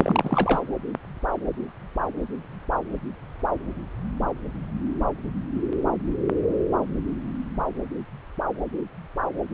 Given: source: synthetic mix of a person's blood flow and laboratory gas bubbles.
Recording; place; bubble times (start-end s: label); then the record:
Doppler ultrasound of blood flow; subclavian vein
0.00-0.62 s: bubbles
From the record:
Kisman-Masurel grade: 212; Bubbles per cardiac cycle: several, 3 to 8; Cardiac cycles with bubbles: 1 to 10%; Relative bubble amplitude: moderate (0.250 to 0.450); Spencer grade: 1 (occasional bubble signal discernible with the cardiac motion signal, with majority of cardiac periods free of bubbles); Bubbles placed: anywhere in the cardiac cycle